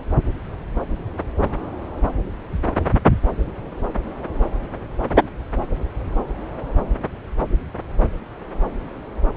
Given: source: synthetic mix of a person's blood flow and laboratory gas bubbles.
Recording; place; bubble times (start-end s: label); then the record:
Doppler ultrasound of blood flow; subclavian vein
no bubbles
From the record:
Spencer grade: 0 (complete lack of bubble signals)